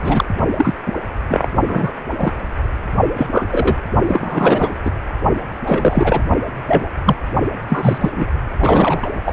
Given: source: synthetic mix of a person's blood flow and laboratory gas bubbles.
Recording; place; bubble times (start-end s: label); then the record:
Doppler ultrasound of blood flow; precordium
0.00-0.24 s: bubbles
0.57-0.74 s: bubbles
0.85-0.94 s: bubbles
1.29-1.47 s: bubbles
1.68-1.93 s: bubbles
2.17-2.33 s: bubbles
3.16-3.26 s: bubbles
3.32-3.47 s: bubbles
3.51-3.76 s: bubbles
4.08-4.75 s: bubbles
4.85-4.91 s: bubbles
5.66-6.23 s: bubbles
6.67-6.89 s: bubbles
7.04-7.16 s: bubbles
7.69-8.09 s: bubbles
8.15-8.25 s: bubbles
8.59-9.11 s: bubbles
9.25-9.33 s: bubbles
From the record:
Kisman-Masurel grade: 243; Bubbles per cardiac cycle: several, 3 to 8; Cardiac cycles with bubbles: 100%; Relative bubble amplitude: loud (0.450 to 0.775); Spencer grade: 3 (all of the cardiac periods contain showers or single bubble signals, but not dominating or overriding the cardiac motion signals); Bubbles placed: only in the low amplitude regions of the cardiac cycle